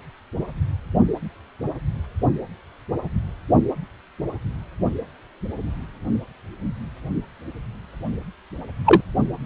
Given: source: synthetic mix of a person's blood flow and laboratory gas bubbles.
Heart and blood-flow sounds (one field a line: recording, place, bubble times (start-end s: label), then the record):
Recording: Doppler ultrasound of blood flow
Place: precordium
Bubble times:
8.85-9.01 s: bubbles
From the record:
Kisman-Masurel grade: 113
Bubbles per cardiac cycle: 1 to 2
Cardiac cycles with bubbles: 1 to 10%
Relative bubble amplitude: loud (0.450 to 0.775)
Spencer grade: 1 (occasional bubble signal discernible with the cardiac motion signal, with majority of cardiac periods free of bubbles)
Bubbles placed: only in the low amplitude regions of the cardiac cycle